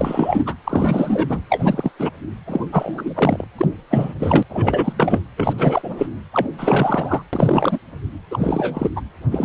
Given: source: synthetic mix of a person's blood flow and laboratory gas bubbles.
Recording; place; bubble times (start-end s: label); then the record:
Doppler ultrasound of blood flow; precordium
0.00-0.54 s: bubbles
0.64-1.42 s: bubbles
1.50-1.91 s: bubbles
1.99-2.11 s: bubbles
2.46-2.66 s: bubbles
2.72-3.44 s: bubbles
3.58-3.67 s: bubbles
3.90-4.14 s: bubbles
4.19-4.43 s: bubbles
4.49-5.21 s: bubbles
5.37-6.06 s: bubbles
6.33-6.46 s: bubbles
6.58-7.21 s: bubbles
7.33-7.78 s: bubbles
8.30-8.90 s: bubbles
8.96-9.01 s: bubbles
9.31-9.45 s: bubbles
From the record:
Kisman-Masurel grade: 342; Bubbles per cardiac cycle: rolling drumbeat, 9 or more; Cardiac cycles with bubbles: 100%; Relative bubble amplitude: moderate (0.250 to 0.450); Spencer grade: 3 (all of the cardiac periods contain showers or single bubble signals, but not dominating or overriding the cardiac motion signals); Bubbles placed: anywhere in the cardiac cycle